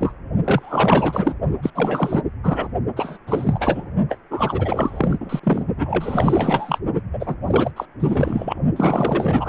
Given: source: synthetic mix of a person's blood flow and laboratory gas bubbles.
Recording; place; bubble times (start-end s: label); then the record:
Doppler ultrasound of blood flow; precordium
0.00-0.14 s: bubbles
0.44-1.35 s: bubbles
1.62-1.71 s: bubbles
1.75-2.22 s: bubbles
2.44-2.68 s: bubbles
2.96-3.17 s: bubbles
3.26-3.90 s: bubbles
4.08-4.18 s: bubbles
4.30-5.40 s: bubbles
5.43-5.63 s: bubbles
5.77-6.79 s: bubbles
6.95-7.01 s: bubbles
7.12-7.36 s: bubbles
7.46-7.71 s: bubbles
7.76-7.86 s: bubbles
8.00-8.60 s: bubbles
8.76-9.49 s: bubbles
From the record:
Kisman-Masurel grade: 444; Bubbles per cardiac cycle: continuous sound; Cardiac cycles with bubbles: 100%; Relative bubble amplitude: maximal (0.775 to 0.999); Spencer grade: 4 (maximum detectable bubble signal sounding continuously throughout systole and diastole of every cardiac period, and overriding the amplitude of the normal cardiac signals); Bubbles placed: only in the low amplitude regions of the cardiac cycle